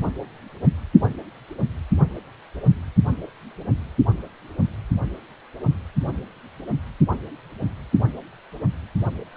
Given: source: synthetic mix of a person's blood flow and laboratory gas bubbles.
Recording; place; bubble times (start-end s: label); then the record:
Doppler ultrasound of blood flow; precordium
9.32-9.37 s: bubbles
From the record:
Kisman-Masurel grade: 112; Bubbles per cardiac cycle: 1 to 2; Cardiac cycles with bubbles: 1 to 10%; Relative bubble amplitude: moderate (0.250 to 0.450); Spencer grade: 1 (occasional bubble signal discernible with the cardiac motion signal, with majority of cardiac periods free of bubbles); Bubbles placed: anywhere in the cardiac cycle